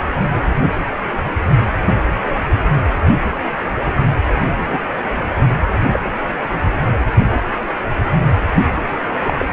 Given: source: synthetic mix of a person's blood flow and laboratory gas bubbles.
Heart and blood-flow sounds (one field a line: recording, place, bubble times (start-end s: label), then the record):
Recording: Doppler ultrasound of blood flow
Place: precordium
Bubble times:
3.75-3.91 s: bubbles
4.72-4.79 s: bubbles
5.92-6.00 s: bubbles
8.55-8.65 s: bubbles
9.23-9.46 s: bubbles
From the record:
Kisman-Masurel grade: 122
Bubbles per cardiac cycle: 1 to 2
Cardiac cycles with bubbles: 10 to 50%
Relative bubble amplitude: moderate (0.250 to 0.450)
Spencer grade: 2 (many but less than half of the cardiac periods contain bubble signals, singularly or in groups)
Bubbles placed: anywhere in the cardiac cycle